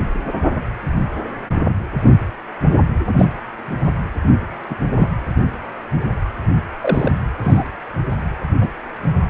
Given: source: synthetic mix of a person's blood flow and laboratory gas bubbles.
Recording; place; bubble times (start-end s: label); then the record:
Doppler ultrasound of blood flow; precordium
3.18-3.25 s: bubbles
4.69-4.75 s: bubbles
4.98-5.08 s: bubbles
6.80-7.12 s: bubbles
7.42-7.64 s: bubbles
8.61-8.70 s: bubbles
From the record:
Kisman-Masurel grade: 122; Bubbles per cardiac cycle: 1 to 2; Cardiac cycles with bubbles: 10 to 50%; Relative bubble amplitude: moderate (0.250 to 0.450); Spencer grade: 2 (many but less than half of the cardiac periods contain bubble signals, singularly or in groups); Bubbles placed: anywhere in the cardiac cycle